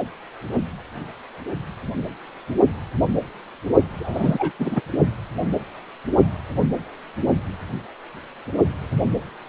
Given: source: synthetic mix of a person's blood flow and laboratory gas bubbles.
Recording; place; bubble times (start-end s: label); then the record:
Doppler ultrasound of blood flow; precordium
3.99-4.52 s: bubbles
4.59-4.81 s: bubbles
From the record:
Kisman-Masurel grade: 212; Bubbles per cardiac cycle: several, 3 to 8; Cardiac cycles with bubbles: 1 to 10%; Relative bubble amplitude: moderate (0.250 to 0.450); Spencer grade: 1 (occasional bubble signal discernible with the cardiac motion signal, with majority of cardiac periods free of bubbles); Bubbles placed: only in the low amplitude regions of the cardiac cycle